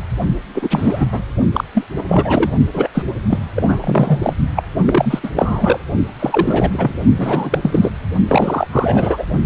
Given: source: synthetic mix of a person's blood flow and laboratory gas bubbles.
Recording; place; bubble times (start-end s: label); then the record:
Doppler ultrasound of blood flow; precordium
0.54-1.06 s: bubbles
1.11-1.22 s: bubbles
1.52-1.64 s: bubbles
1.74-1.84 s: bubbles
1.97-2.03 s: bubbles
2.08-2.51 s: bubbles
2.73-2.88 s: bubbles
2.94-3.03 s: bubbles
3.30-3.39 s: bubbles
3.55-4.18 s: bubbles
4.22-4.33 s: bubbles
4.55-4.63 s: bubbles
4.82-5.19 s: bubbles
5.23-5.32 s: bubbles
5.35-5.79 s: bubbles
6.19-6.97 s: bubbles
7.17-7.59 s: bubbles
7.62-7.90 s: bubbles
8.28-8.67 s: bubbles
8.71-9.25 s: bubbles
From the record:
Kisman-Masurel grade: 343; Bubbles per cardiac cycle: rolling drumbeat, 9 or more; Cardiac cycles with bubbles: 100%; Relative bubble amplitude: loud (0.450 to 0.775); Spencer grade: 3 (all of the cardiac periods contain showers or single bubble signals, but not dominating or overriding the cardiac motion signals); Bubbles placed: only in the low amplitude regions of the cardiac cycle